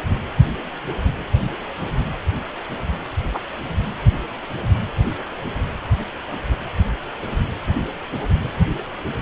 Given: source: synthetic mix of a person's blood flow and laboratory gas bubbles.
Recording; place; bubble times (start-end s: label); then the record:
Doppler ultrasound of blood flow; precordium
3.34-3.39 s: bubbles
From the record:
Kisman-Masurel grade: 113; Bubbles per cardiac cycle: 1 to 2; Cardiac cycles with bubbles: 1 to 10%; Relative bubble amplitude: loud (0.450 to 0.775); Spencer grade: 1 (occasional bubble signal discernible with the cardiac motion signal, with majority of cardiac periods free of bubbles); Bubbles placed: anywhere in the cardiac cycle